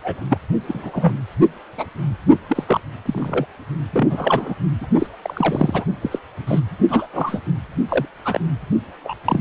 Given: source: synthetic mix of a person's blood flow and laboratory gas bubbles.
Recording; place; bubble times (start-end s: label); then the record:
Doppler ultrasound of blood flow; precordium
0.02-0.22 s: bubbles
0.28-0.38 s: bubbles
0.67-1.14 s: bubbles
1.77-1.85 s: bubbles
2.48-2.64 s: bubbles
2.67-2.80 s: bubbles
3.05-3.46 s: bubbles
3.93-4.55 s: bubbles
4.81-4.87 s: bubbles
4.99-5.07 s: bubbles
5.22-5.85 s: bubbles
6.01-6.19 s: bubbles
6.47-6.61 s: bubbles
6.88-7.08 s: bubbles
7.13-7.40 s: bubbles
7.89-8.06 s: bubbles
8.24-8.40 s: bubbles
9.04-9.16 s: bubbles
9.24-9.40 s: bubbles
From the record:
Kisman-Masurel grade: 242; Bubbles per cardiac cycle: several, 3 to 8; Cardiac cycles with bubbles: 100%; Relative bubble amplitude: moderate (0.250 to 0.450); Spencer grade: 3 (all of the cardiac periods contain showers or single bubble signals, but not dominating or overriding the cardiac motion signals); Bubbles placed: only in the low amplitude regions of the cardiac cycle